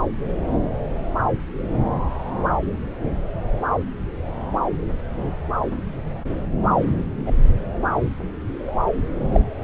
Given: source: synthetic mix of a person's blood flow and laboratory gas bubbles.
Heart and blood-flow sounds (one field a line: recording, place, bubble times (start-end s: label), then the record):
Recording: Doppler ultrasound of blood flow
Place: subclavian vein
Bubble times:
7.26-7.31 s: bubbles
9.32-9.41 s: bubbles
From the record:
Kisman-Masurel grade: 122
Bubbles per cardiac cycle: 1 to 2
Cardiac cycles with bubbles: 10 to 50%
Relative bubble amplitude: moderate (0.250 to 0.450)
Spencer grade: 2 (many but less than half of the cardiac periods contain bubble signals, singularly or in groups)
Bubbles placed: anywhere in the cardiac cycle